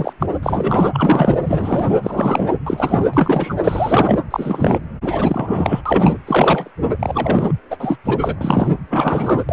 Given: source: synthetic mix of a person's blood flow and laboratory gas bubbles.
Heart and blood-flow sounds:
Doppler ultrasound of blood flow; precordium
0.00-0.13 s: bubbles
0.20-0.27 s: bubbles
0.42-1.39 s: bubbles
1.45-2.00 s: bubbles
2.02-2.47 s: bubbles
2.65-3.05 s: bubbles
3.13-3.54 s: bubbles
3.63-4.19 s: bubbles
4.30-4.78 s: bubbles
5.02-5.81 s: bubbles
5.86-6.18 s: bubbles
6.27-6.71 s: bubbles
6.99-7.53 s: bubbles
7.70-7.97 s: bubbles
8.04-8.19 s: bubbles
8.21-8.37 s: bubbles
8.41-8.76 s: bubbles
8.90-9.44 s: bubbles
9.48-9.53 s: bubbles
From the record:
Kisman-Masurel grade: 343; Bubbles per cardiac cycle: rolling drumbeat, 9 or more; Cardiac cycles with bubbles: 100%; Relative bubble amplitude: loud (0.450 to 0.775); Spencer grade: 3 (all of the cardiac periods contain showers or single bubble signals, but not dominating or overriding the cardiac motion signals); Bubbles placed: anywhere in the cardiac cycle

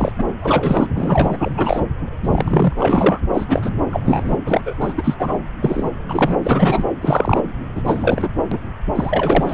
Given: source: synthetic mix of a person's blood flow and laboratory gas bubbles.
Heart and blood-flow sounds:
Doppler ultrasound of blood flow; subclavian vein
0.00-0.12 s: bubbles
0.18-0.24 s: bubbles
0.41-0.86 s: bubbles
0.94-1.37 s: bubbles
1.40-1.80 s: bubbles
2.23-2.73 s: bubbles
2.79-3.19 s: bubbles
3.33-3.45 s: bubbles
3.48-3.71 s: bubbles
3.92-4.00 s: bubbles
4.04-4.37 s: bubbles
4.46-4.93 s: bubbles
4.97-5.14 s: bubbles
5.19-5.38 s: bubbles
5.61-5.90 s: bubbles
6.08-6.37 s: bubbles
6.43-6.83 s: bubbles
7.01-7.42 s: bubbles
7.75-7.82 s: bubbles
7.84-8.28 s: bubbles
8.51-8.60 s: bubbles
8.95-9.54 s: bubbles
From the record:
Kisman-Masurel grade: 243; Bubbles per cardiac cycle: several, 3 to 8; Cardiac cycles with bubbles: 100%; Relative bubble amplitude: loud (0.450 to 0.775); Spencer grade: 3 (all of the cardiac periods contain showers or single bubble signals, but not dominating or overriding the cardiac motion signals); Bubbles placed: anywhere in the cardiac cycle

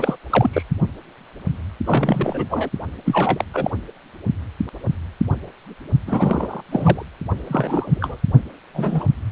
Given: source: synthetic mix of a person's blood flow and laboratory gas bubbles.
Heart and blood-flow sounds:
Doppler ultrasound of blood flow; precordium
0.00-0.17 s: bubbles
0.29-0.50 s: bubbles
0.53-0.63 s: bubbles
1.85-2.45 s: bubbles
2.50-2.69 s: bubbles
3.05-3.45 s: bubbles
3.54-3.71 s: bubbles
6.07-6.60 s: bubbles
6.71-7.02 s: bubbles
7.47-8.17 s: bubbles
8.73-9.05 s: bubbles
From the record:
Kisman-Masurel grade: 233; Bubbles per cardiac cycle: several, 3 to 8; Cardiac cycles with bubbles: 50 to 99%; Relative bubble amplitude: loud (0.450 to 0.775); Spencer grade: 3 (all of the cardiac periods contain showers or single bubble signals, but not dominating or overriding the cardiac motion signals); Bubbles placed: only in the low amplitude regions of the cardiac cycle

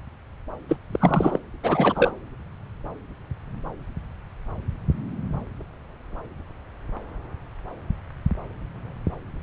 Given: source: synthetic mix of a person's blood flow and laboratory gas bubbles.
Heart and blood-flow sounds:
Doppler ultrasound of blood flow; subclavian vein
0.68-0.77 s: bubbles
0.91-1.39 s: bubbles
1.63-2.13 s: bubbles
From the record:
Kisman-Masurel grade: 222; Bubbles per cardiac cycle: several, 3 to 8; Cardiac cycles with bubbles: 10 to 50%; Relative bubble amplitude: moderate (0.250 to 0.450); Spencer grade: 2 (many but less than half of the cardiac periods contain bubble signals, singularly or in groups); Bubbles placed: anywhere in the cardiac cycle

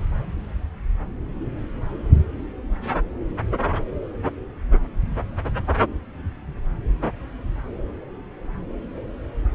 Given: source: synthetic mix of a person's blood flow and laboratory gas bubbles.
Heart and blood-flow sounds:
Doppler ultrasound of blood flow; subclavian vein
no bubbles
From the record:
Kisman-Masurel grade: 000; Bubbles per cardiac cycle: 0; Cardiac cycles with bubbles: 0%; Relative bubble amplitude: no bubbles discernible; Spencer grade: 0 (complete lack of bubble signals)

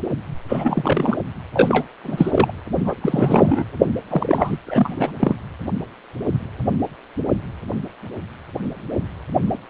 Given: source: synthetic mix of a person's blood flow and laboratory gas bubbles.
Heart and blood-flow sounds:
Doppler ultrasound of blood flow; precordium
0.48-1.16 s: bubbles
1.54-1.84 s: bubbles
2.04-2.52 s: bubbles
2.79-2.94 s: bubbles
3.01-3.64 s: bubbles
4.09-4.58 s: bubbles
4.67-5.11 s: bubbles
5.19-5.35 s: bubbles
From the record:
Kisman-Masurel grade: 332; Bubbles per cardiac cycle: rolling drumbeat, 9 or more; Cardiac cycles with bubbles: 50 to 99%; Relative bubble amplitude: moderate (0.250 to 0.450); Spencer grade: 3 (all of the cardiac periods contain showers or single bubble signals, but not dominating or overriding the cardiac motion signals); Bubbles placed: anywhere in the cardiac cycle

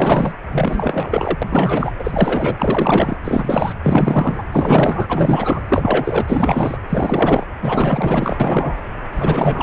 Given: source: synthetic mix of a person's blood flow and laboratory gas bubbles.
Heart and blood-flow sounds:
Doppler ultrasound of blood flow; precordium
0.00-0.35 s: bubbles
0.51-1.39 s: bubbles
1.42-1.92 s: bubbles
1.98-3.17 s: bubbles
3.23-3.73 s: bubbles
3.82-4.46 s: bubbles
4.52-5.06 s: bubbles
5.09-5.63 s: bubbles
5.69-6.77 s: bubbles
6.89-7.47 s: bubbles
7.62-8.37 s: bubbles
8.39-8.77 s: bubbles
9.16-9.63 s: bubbles
From the record:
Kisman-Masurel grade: 444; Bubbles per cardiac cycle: continuous sound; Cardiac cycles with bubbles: 100%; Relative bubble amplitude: maximal (0.775 to 0.999); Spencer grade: 4 (maximum detectable bubble signal sounding continuously throughout systole and diastole of every cardiac period, and overriding the amplitude of the normal cardiac signals); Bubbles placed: anywhere in the cardiac cycle

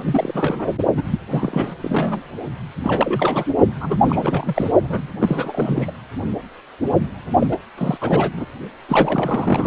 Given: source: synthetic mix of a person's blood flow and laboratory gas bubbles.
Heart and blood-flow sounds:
Doppler ultrasound of blood flow; precordium
0.00-0.69 s: bubbles
0.97-1.02 s: bubbles
1.11-1.19 s: bubbles
1.29-1.74 s: bubbles
1.81-2.21 s: bubbles
2.83-3.44 s: bubbles
3.81-4.03 s: bubbles
4.05-4.72 s: bubbles
4.83-5.08 s: bubbles
5.21-5.94 s: bubbles
7.38-7.47 s: bubbles
7.51-7.56 s: bubbles
7.78-7.98 s: bubbles
8.00-8.31 s: bubbles
8.36-8.46 s: bubbles
8.88-9.66 s: bubbles
From the record:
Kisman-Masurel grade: 332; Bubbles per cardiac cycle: rolling drumbeat, 9 or more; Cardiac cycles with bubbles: 50 to 99%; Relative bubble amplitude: moderate (0.250 to 0.450); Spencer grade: 3 (all of the cardiac periods contain showers or single bubble signals, but not dominating or overriding the cardiac motion signals); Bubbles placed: only in the low amplitude regions of the cardiac cycle

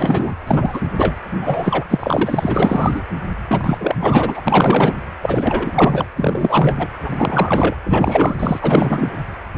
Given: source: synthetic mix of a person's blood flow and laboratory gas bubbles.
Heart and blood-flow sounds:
Doppler ultrasound of blood flow; precordium
0.00-0.35 s: bubbles
0.47-0.81 s: bubbles
0.97-1.16 s: bubbles
1.41-1.85 s: bubbles
1.89-3.03 s: bubbles
3.47-3.95 s: bubbles
4.00-4.42 s: bubbles
4.47-4.94 s: bubbles
5.21-6.05 s: bubbles
6.15-6.87 s: bubbles
7.03-7.76 s: bubbles
7.83-8.35 s: bubbles
8.39-9.25 s: bubbles
From the record:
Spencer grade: 4 (maximum detectable bubble signal sounding continuously throughout systole and diastole of every cardiac period, and overriding the amplitude of the normal cardiac signals); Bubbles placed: anywhere in the cardiac cycle

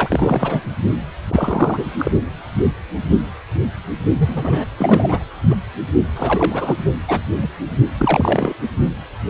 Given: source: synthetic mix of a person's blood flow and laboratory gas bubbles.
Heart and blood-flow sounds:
Doppler ultrasound of blood flow; precordium
0.00-0.60 s: bubbles
0.65-0.74 s: bubbles
1.27-1.91 s: bubbles
1.98-2.11 s: bubbles
4.18-4.64 s: bubbles
4.78-5.27 s: bubbles
5.50-5.55 s: bubbles
6.15-6.76 s: bubbles
7.07-7.21 s: bubbles
7.42-7.48 s: bubbles
7.98-8.54 s: bubbles
From the record:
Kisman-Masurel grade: 333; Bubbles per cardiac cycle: rolling drumbeat, 9 or more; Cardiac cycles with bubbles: 50 to 99%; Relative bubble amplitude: loud (0.450 to 0.775); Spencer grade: 3 (all of the cardiac periods contain showers or single bubble signals, but not dominating or overriding the cardiac motion signals); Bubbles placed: only in the low amplitude regions of the cardiac cycle

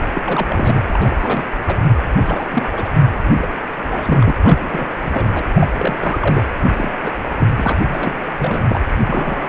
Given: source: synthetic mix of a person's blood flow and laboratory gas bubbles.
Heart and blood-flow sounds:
Doppler ultrasound of blood flow; precordium
0.15-0.80 s: bubbles
0.87-1.16 s: bubbles
1.19-1.44 s: bubbles
1.66-1.85 s: bubbles
2.18-2.47 s: bubbles
2.50-2.67 s: bubbles
2.73-2.91 s: bubbles
3.34-3.48 s: bubbles
3.86-4.35 s: bubbles
4.42-4.88 s: bubbles
5.02-5.28 s: bubbles
5.33-5.46 s: bubbles
5.54-5.67 s: bubbles
5.78-6.18 s: bubbles
6.22-6.46 s: bubbles
6.64-6.74 s: bubbles
6.77-6.92 s: bubbles
7.03-7.12 s: bubbles
7.18-7.22 s: bubbles
7.38-7.47 s: bubbles
7.55-7.79 s: bubbles
7.86-8.17 s: bubbles
8.37-8.81 s: bubbles
8.94-9.49 s: bubbles
From the record:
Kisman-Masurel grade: 342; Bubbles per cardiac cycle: rolling drumbeat, 9 or more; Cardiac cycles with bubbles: 100%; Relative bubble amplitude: moderate (0.250 to 0.450); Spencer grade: 3 (all of the cardiac periods contain showers or single bubble signals, but not dominating or overriding the cardiac motion signals); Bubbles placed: anywhere in the cardiac cycle

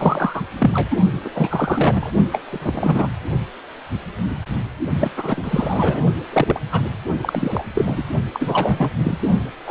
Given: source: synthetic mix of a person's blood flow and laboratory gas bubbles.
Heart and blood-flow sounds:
Doppler ultrasound of blood flow; precordium
0.00-0.42 s: bubbles
0.58-0.97 s: bubbles
1.24-1.30 s: bubbles
1.34-2.12 s: bubbles
2.31-2.42 s: bubbles
2.51-3.08 s: bubbles
5.00-5.11 s: bubbles
5.16-6.02 s: bubbles
6.33-6.60 s: bubbles
6.71-6.83 s: bubbles
7.21-7.64 s: bubbles
7.74-8.04 s: bubbles
8.33-8.90 s: bubbles
9.03-9.17 s: bubbles
9.66-9.71 s: bubbles
From the record:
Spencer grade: 3 (all of the cardiac periods contain showers or single bubble signals, but not dominating or overriding the cardiac motion signals); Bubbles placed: only in the low amplitude regions of the cardiac cycle

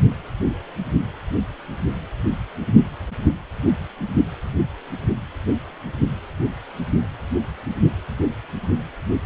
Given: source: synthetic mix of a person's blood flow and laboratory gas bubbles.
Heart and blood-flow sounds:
Doppler ultrasound of blood flow; precordium
no bubbles
From the record:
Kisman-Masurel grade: 000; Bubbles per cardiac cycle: 0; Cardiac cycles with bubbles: 0%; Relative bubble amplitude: no bubbles discernible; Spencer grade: 0 (complete lack of bubble signals)

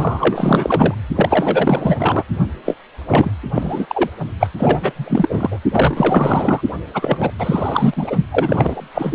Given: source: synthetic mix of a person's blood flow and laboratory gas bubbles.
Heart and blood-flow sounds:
Doppler ultrasound of blood flow; precordium
0.00-0.95 s: bubbles
1.15-2.23 s: bubbles
2.65-2.77 s: bubbles
3.08-3.31 s: bubbles
3.54-4.11 s: bubbles
4.39-4.47 s: bubbles
4.57-4.93 s: bubbles
4.96-5.60 s: bubbles
5.71-6.61 s: bubbles
6.94-7.31 s: bubbles
7.38-8.16 s: bubbles
8.32-8.88 s: bubbles
8.94-9.15 s: bubbles
From the record:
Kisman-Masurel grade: 444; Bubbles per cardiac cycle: continuous sound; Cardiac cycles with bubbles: 100%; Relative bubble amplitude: maximal (0.775 to 0.999); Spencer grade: 4 (maximum detectable bubble signal sounding continuously throughout systole and diastole of every cardiac period, and overriding the amplitude of the normal cardiac signals); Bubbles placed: only in the low amplitude regions of the cardiac cycle

